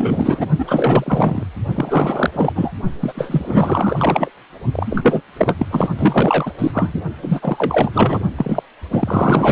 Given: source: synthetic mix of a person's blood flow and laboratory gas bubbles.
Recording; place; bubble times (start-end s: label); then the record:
Doppler ultrasound of blood flow; precordium
0.00-0.47 s: bubbles
0.58-1.44 s: bubbles
1.75-2.52 s: bubbles
2.55-2.71 s: bubbles
3.00-4.30 s: bubbles
4.72-5.22 s: bubbles
5.38-5.54 s: bubbles
5.58-5.67 s: bubbles
5.71-5.88 s: bubbles
5.97-6.51 s: bubbles
6.58-7.00 s: bubbles
7.21-7.90 s: bubbles
7.93-8.24 s: bubbles
8.37-8.62 s: bubbles
8.90-9.52 s: bubbles
From the record:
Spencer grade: 4 (maximum detectable bubble signal sounding continuously throughout systole and diastole of every cardiac period, and overriding the amplitude of the normal cardiac signals); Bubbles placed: only in the low amplitude regions of the cardiac cycle